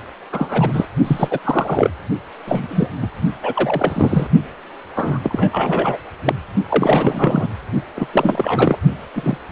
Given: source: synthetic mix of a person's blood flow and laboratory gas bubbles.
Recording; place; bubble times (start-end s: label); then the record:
Doppler ultrasound of blood flow; precordium
0.32-0.86 s: bubbles
1.04-1.39 s: bubbles
1.44-1.90 s: bubbles
2.46-2.88 s: bubbles
3.01-3.09 s: bubbles
3.43-4.29 s: bubbles
4.96-5.19 s: bubbles
5.22-5.98 s: bubbles
6.25-6.35 s: bubbles
6.69-7.48 s: bubbles
7.95-8.07 s: bubbles
8.12-8.77 s: bubbles
9.15-9.37 s: bubbles
From the record:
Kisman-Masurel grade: 243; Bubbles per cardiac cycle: several, 3 to 8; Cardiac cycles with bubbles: 100%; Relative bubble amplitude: loud (0.450 to 0.775); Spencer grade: 3 (all of the cardiac periods contain showers or single bubble signals, but not dominating or overriding the cardiac motion signals); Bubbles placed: only in the low amplitude regions of the cardiac cycle